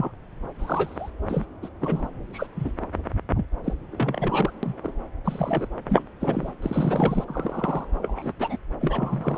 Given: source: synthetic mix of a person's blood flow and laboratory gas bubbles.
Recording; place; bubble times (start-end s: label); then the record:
Doppler ultrasound of blood flow; subclavian vein
0.00-0.12 s: bubbles
0.59-1.10 s: bubbles
1.29-1.46 s: bubbles
1.62-1.69 s: bubbles
1.80-2.09 s: bubbles
2.33-2.46 s: bubbles
2.56-2.72 s: bubbles
3.35-3.45 s: bubbles
3.64-3.73 s: bubbles
3.91-4.51 s: bubbles
4.63-4.74 s: bubbles
4.83-4.93 s: bubbles
5.24-5.68 s: bubbles
5.90-6.03 s: bubbles
6.20-6.52 s: bubbles
6.62-7.25 s: bubbles
7.28-7.85 s: bubbles
8.02-8.33 s: bubbles
8.39-8.58 s: bubbles
8.80-9.38 s: bubbles
From the record:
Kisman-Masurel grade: 232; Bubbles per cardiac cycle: several, 3 to 8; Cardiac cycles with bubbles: 50 to 99%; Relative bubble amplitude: moderate (0.250 to 0.450); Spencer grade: 3 (all of the cardiac periods contain showers or single bubble signals, but not dominating or overriding the cardiac motion signals); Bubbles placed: anywhere in the cardiac cycle